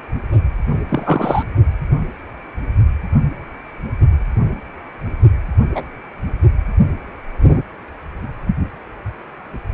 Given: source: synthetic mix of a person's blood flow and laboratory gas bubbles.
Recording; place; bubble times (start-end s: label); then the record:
Doppler ultrasound of blood flow; precordium
0.89-1.43 s: bubbles
5.75-5.84 s: bubbles
From the record:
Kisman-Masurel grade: 123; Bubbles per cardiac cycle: 1 to 2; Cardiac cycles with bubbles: 10 to 50%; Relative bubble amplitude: loud (0.450 to 0.775); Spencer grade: 2 (many but less than half of the cardiac periods contain bubble signals, singularly or in groups); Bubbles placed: only in the low amplitude regions of the cardiac cycle